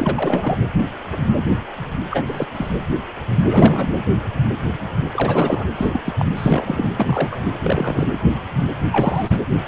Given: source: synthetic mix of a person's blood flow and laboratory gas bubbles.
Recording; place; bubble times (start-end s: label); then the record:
Doppler ultrasound of blood flow; precordium
0.00-0.56 s: bubbles
2.10-2.22 s: bubbles
2.25-2.46 s: bubbles
2.55-2.68 s: bubbles
3.47-4.03 s: bubbles
5.12-5.66 s: bubbles
5.75-6.00 s: bubbles
6.04-6.14 s: bubbles
6.19-6.25 s: bubbles
6.37-6.90 s: bubbles
6.96-7.39 s: bubbles
7.63-8.07 s: bubbles
8.92-9.37 s: bubbles
From the record:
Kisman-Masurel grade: 232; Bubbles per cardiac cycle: several, 3 to 8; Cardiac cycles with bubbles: 50 to 99%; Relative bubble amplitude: moderate (0.250 to 0.450); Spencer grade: 3 (all of the cardiac periods contain showers or single bubble signals, but not dominating or overriding the cardiac motion signals); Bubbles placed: anywhere in the cardiac cycle